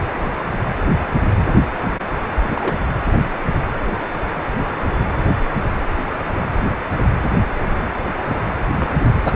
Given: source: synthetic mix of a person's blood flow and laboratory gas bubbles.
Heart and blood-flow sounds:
Doppler ultrasound of blood flow; precordium
2.50-2.75 s: bubbles
4.64-4.70 s: bubbles
6.34-6.46 s: bubbles
8.29-8.37 s: bubbles
8.76-8.90 s: bubbles
9.26-9.34 s: bubbles
From the record:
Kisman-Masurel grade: 121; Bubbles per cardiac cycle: 1 to 2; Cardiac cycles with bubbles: 10 to 50%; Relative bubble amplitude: barely perceptible (0.100 to 0.250); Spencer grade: 2 (many but less than half of the cardiac periods contain bubble signals, singularly or in groups); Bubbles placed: anywhere in the cardiac cycle

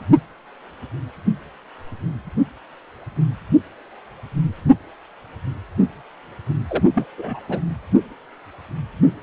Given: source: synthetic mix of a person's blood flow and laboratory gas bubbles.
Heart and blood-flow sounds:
Doppler ultrasound of blood flow; precordium
6.68-6.83 s: bubbles
6.95-7.04 s: bubbles
7.17-7.40 s: bubbles
7.49-7.60 s: bubbles
From the record:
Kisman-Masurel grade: 222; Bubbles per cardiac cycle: several, 3 to 8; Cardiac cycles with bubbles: 10 to 50%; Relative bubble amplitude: moderate (0.250 to 0.450); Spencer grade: 2 (many but less than half of the cardiac periods contain bubble signals, singularly or in groups); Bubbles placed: only in the low amplitude regions of the cardiac cycle

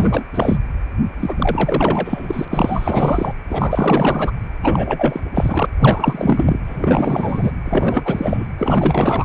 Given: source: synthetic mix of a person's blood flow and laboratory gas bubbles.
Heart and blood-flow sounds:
Doppler ultrasound of blood flow; precordium
0.00-0.24 s: bubbles
0.34-0.57 s: bubbles
1.20-3.33 s: bubbles
3.49-4.32 s: bubbles
4.62-5.21 s: bubbles
5.34-5.66 s: bubbles
5.79-6.60 s: bubbles
6.67-7.52 s: bubbles
7.65-8.48 s: bubbles
8.58-9.25 s: bubbles
From the record:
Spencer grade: 4 (maximum detectable bubble signal sounding continuously throughout systole and diastole of every cardiac period, and overriding the amplitude of the normal cardiac signals); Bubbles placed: anywhere in the cardiac cycle

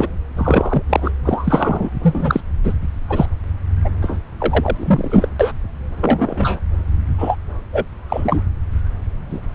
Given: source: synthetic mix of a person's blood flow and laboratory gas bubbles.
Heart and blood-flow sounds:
Doppler ultrasound of blood flow; subclavian vein
0.00-0.08 s: bubbles
0.37-0.82 s: bubbles
0.89-1.12 s: bubbles
1.25-1.91 s: bubbles
2.02-2.40 s: bubbles
2.63-2.74 s: bubbles
3.09-3.26 s: bubbles
3.84-3.90 s: bubbles
4.02-4.20 s: bubbles
4.39-5.28 s: bubbles
5.40-5.52 s: bubbles
6.00-6.60 s: bubbles
7.18-7.36 s: bubbles
7.73-7.85 s: bubbles
8.09-8.42 s: bubbles
9.29-9.41 s: bubbles
From the record:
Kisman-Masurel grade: 243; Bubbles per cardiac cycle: several, 3 to 8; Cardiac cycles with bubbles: 100%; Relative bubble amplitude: loud (0.450 to 0.775); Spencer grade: 3 (all of the cardiac periods contain showers or single bubble signals, but not dominating or overriding the cardiac motion signals); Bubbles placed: anywhere in the cardiac cycle

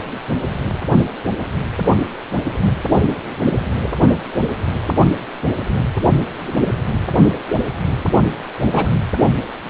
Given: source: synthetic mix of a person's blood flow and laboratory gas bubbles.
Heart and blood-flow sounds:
Doppler ultrasound of blood flow; precordium
8.61-8.88 s: bubbles
From the record:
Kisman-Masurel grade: 112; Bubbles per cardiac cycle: 1 to 2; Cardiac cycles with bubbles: 1 to 10%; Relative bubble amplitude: moderate (0.250 to 0.450); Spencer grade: 1 (occasional bubble signal discernible with the cardiac motion signal, with majority of cardiac periods free of bubbles); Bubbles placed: anywhere in the cardiac cycle

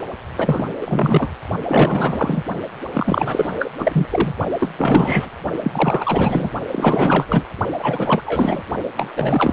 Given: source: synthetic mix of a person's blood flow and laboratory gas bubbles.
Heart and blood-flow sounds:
Doppler ultrasound of blood flow; precordium
0.36-0.70 s: bubbles
0.81-1.31 s: bubbles
1.68-2.44 s: bubbles
2.94-3.54 s: bubbles
3.59-3.70 s: bubbles
3.78-4.07 s: bubbles
4.11-4.34 s: bubbles
4.60-4.69 s: bubbles
4.77-5.29 s: bubbles
5.62-6.51 s: bubbles
6.72-7.45 s: bubbles
7.78-8.62 s: bubbles
8.96-9.09 s: bubbles
9.16-9.52 s: bubbles
From the record:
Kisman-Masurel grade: 444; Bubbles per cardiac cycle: continuous sound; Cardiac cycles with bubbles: 100%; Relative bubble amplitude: maximal (0.775 to 0.999); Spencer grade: 4 (maximum detectable bubble signal sounding continuously throughout systole and diastole of every cardiac period, and overriding the amplitude of the normal cardiac signals); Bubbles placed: only in the low amplitude regions of the cardiac cycle

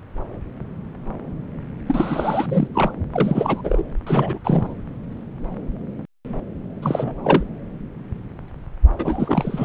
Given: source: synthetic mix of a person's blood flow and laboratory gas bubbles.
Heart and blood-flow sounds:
Doppler ultrasound of blood flow; subclavian vein
1.86-2.67 s: bubbles
2.73-2.91 s: bubbles
3.12-3.82 s: bubbles
4.06-4.38 s: bubbles
4.45-4.74 s: bubbles
6.82-7.43 s: bubbles
8.99-9.65 s: bubbles
From the record:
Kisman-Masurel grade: 332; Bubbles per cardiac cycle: rolling drumbeat, 9 or more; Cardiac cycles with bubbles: 50 to 99%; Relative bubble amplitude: moderate (0.250 to 0.450); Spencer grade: 3 (all of the cardiac periods contain showers or single bubble signals, but not dominating or overriding the cardiac motion signals); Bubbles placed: anywhere in the cardiac cycle

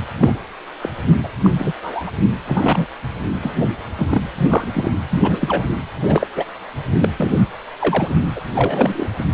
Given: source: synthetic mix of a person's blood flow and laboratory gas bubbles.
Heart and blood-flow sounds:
Doppler ultrasound of blood flow; precordium
0.18-0.35 s: bubbles
0.82-0.89 s: bubbles
1.23-1.29 s: bubbles
1.44-1.50 s: bubbles
1.58-1.73 s: bubbles
1.82-2.11 s: bubbles
2.46-2.85 s: bubbles
3.41-3.56 s: bubbles
3.96-4.67 s: bubbles
4.72-4.88 s: bubbles
5.10-5.64 s: bubbles
6.04-6.27 s: bubbles
6.35-6.45 s: bubbles
7.02-7.08 s: bubbles
7.17-7.30 s: bubbles
7.79-8.14 s: bubbles
8.35-8.40 s: bubbles
8.55-9.07 s: bubbles
9.18-9.25 s: bubbles
From the record:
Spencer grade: 3 (all of the cardiac periods contain showers or single bubble signals, but not dominating or overriding the cardiac motion signals); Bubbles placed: anywhere in the cardiac cycle

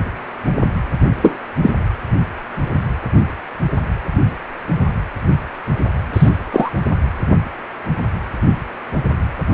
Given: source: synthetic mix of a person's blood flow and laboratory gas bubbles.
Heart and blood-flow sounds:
Doppler ultrasound of blood flow; precordium
1.22-1.38 s: bubbles
1.62-1.72 s: bubbles
6.13-6.29 s: bubbles
6.52-6.71 s: bubbles
From the record:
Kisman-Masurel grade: 123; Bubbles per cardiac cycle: 1 to 2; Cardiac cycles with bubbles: 10 to 50%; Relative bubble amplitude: loud (0.450 to 0.775); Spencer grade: 2 (many but less than half of the cardiac periods contain bubble signals, singularly or in groups); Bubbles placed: anywhere in the cardiac cycle

